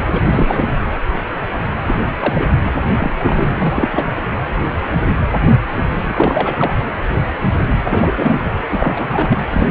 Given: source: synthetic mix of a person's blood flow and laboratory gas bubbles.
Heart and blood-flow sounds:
Doppler ultrasound of blood flow; precordium
0.06-0.21 s: bubbles
0.28-0.74 s: bubbles
1.86-2.14 s: bubbles
2.19-2.50 s: bubbles
2.60-2.72 s: bubbles
2.99-3.13 s: bubbles
3.23-4.12 s: bubbles
6.07-6.75 s: bubbles
7.85-8.14 s: bubbles
8.17-8.51 s: bubbles
8.70-9.38 s: bubbles
9.51-9.70 s: bubbles
From the record:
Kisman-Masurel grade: 332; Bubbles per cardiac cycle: rolling drumbeat, 9 or more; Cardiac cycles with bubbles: 50 to 99%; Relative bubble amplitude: moderate (0.250 to 0.450); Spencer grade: 3 (all of the cardiac periods contain showers or single bubble signals, but not dominating or overriding the cardiac motion signals); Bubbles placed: anywhere in the cardiac cycle

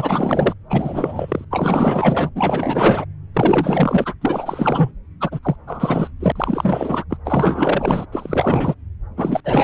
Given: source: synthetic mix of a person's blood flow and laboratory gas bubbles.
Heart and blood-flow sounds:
Doppler ultrasound of blood flow; subclavian vein
0.00-0.53 s: bubbles
0.70-1.45 s: bubbles
1.50-2.29 s: bubbles
2.35-3.05 s: bubbles
3.33-4.14 s: bubbles
4.21-4.92 s: bubbles
5.20-5.39 s: bubbles
5.42-5.56 s: bubbles
5.67-6.12 s: bubbles
6.20-6.32 s: bubbles
6.35-7.04 s: bubbles
7.10-7.17 s: bubbles
7.25-8.06 s: bubbles
8.12-8.75 s: bubbles
9.17-9.41 s: bubbles
9.45-9.64 s: bubbles
From the record:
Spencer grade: 4 (maximum detectable bubble signal sounding continuously throughout systole and diastole of every cardiac period, and overriding the amplitude of the normal cardiac signals); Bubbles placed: anywhere in the cardiac cycle

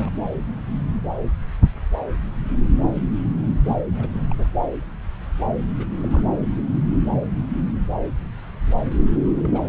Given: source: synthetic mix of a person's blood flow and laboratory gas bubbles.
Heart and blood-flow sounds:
Doppler ultrasound of blood flow; subclavian vein
0.00-0.11 s: bubbles
3.65-3.76 s: bubbles
3.85-4.23 s: bubbles
4.30-4.34 s: bubbles
4.38-4.47 s: bubbles
5.77-5.84 s: bubbles
5.99-6.25 s: bubbles
9.43-9.62 s: bubbles
From the record:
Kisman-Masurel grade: 221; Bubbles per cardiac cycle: several, 3 to 8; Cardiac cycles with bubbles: 10 to 50%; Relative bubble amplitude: barely perceptible (0.100 to 0.250); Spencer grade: 2 (many but less than half of the cardiac periods contain bubble signals, singularly or in groups); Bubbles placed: anywhere in the cardiac cycle

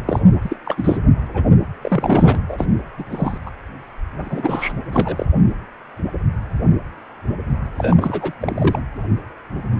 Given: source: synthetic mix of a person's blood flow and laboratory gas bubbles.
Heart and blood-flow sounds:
Doppler ultrasound of blood flow; precordium
0.06-0.20 s: bubbles
0.41-0.56 s: bubbles
0.66-0.97 s: bubbles
1.34-1.44 s: bubbles
1.81-2.39 s: bubbles
2.48-2.65 s: bubbles
2.97-3.04 s: bubbles
3.10-3.38 s: bubbles
3.46-3.50 s: bubbles
4.20-4.73 s: bubbles
4.93-5.26 s: bubbles
7.77-8.32 s: bubbles
8.39-8.81 s: bubbles
From the record:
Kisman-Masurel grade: 232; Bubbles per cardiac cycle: several, 3 to 8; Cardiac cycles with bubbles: 50 to 99%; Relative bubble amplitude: moderate (0.250 to 0.450); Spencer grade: 3 (all of the cardiac periods contain showers or single bubble signals, but not dominating or overriding the cardiac motion signals); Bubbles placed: anywhere in the cardiac cycle

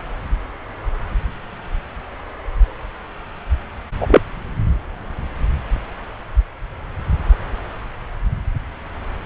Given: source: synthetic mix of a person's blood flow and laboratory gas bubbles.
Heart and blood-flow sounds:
Doppler ultrasound of blood flow; subclavian vein
4.00-4.21 s: bubbles
From the record:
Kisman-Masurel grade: 113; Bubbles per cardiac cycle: 1 to 2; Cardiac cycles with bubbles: 1 to 10%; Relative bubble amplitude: loud (0.450 to 0.775); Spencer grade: 1 (occasional bubble signal discernible with the cardiac motion signal, with majority of cardiac periods free of bubbles); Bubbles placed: anywhere in the cardiac cycle

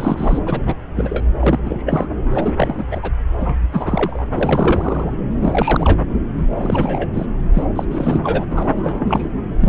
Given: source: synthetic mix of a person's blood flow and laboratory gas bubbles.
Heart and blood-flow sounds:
Doppler ultrasound of blood flow; subclavian vein
0.00-0.39 s: bubbles
0.47-0.81 s: bubbles
0.96-1.25 s: bubbles
1.40-1.59 s: bubbles
1.65-1.83 s: bubbles
1.86-2.08 s: bubbles
2.33-2.52 s: bubbles
2.56-3.11 s: bubbles
3.40-3.57 s: bubbles
3.72-4.23 s: bubbles
4.33-5.10 s: bubbles
5.39-5.99 s: bubbles
6.37-6.45 s: bubbles
6.50-7.09 s: bubbles
7.13-7.26 s: bubbles
7.54-7.66 s: bubbles
7.75-7.84 s: bubbles
7.91-8.20 s: bubbles
8.22-8.46 s: bubbles
8.50-9.32 s: bubbles
9.60-9.69 s: bubbles
From the record:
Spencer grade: 3 (all of the cardiac periods contain showers or single bubble signals, but not dominating or overriding the cardiac motion signals); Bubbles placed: anywhere in the cardiac cycle

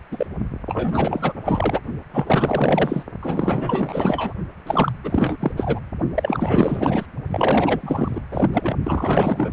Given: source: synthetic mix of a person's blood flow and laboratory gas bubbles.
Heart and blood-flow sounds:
Doppler ultrasound of blood flow; precordium
0.11-0.27 s: bubbles
0.66-1.34 s: bubbles
1.45-1.80 s: bubbles
2.12-3.04 s: bubbles
3.22-4.33 s: bubbles
4.67-4.92 s: bubbles
5.03-5.52 s: bubbles
5.56-5.80 s: bubbles
6.14-7.06 s: bubbles
7.29-8.21 s: bubbles
8.31-8.49 s: bubbles
8.53-8.76 s: bubbles
8.83-9.50 s: bubbles
From the record:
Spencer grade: 4 (maximum detectable bubble signal sounding continuously throughout systole and diastole of every cardiac period, and overriding the amplitude of the normal cardiac signals); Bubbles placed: only in the low amplitude regions of the cardiac cycle

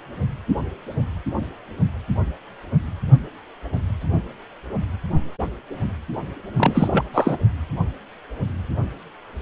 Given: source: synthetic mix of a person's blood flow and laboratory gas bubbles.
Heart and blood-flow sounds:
Doppler ultrasound of blood flow; precordium
6.56-7.02 s: bubbles
7.13-7.37 s: bubbles
From the record:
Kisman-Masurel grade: 213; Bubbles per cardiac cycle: several, 3 to 8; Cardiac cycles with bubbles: 1 to 10%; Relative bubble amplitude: loud (0.450 to 0.775); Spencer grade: 1 (occasional bubble signal discernible with the cardiac motion signal, with majority of cardiac periods free of bubbles); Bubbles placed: only in the low amplitude regions of the cardiac cycle

